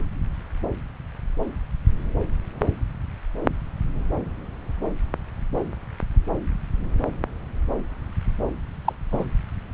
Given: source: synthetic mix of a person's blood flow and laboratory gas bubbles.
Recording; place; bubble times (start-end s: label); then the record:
Doppler ultrasound of blood flow; subclavian vein
8.85-8.93 s: bubbles
9.12-9.24 s: bubbles
From the record:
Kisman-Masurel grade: 112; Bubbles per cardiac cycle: 1 to 2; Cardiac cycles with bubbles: 1 to 10%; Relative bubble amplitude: moderate (0.250 to 0.450); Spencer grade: 1 (occasional bubble signal discernible with the cardiac motion signal, with majority of cardiac periods free of bubbles); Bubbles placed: anywhere in the cardiac cycle